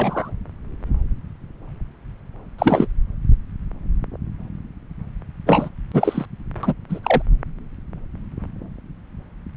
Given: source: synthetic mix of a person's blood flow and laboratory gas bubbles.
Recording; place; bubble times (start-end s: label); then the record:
Doppler ultrasound of blood flow; subclavian vein
0.00-0.31 s: bubbles
2.58-2.87 s: bubbles
5.46-5.69 s: bubbles
5.93-6.25 s: bubbles
6.63-6.74 s: bubbles
6.89-7.00 s: bubbles
7.04-7.22 s: bubbles
From the record:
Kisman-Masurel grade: 223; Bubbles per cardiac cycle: several, 3 to 8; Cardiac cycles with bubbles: 10 to 50%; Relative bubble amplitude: loud (0.450 to 0.775); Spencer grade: 2 (many but less than half of the cardiac periods contain bubble signals, singularly or in groups); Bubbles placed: anywhere in the cardiac cycle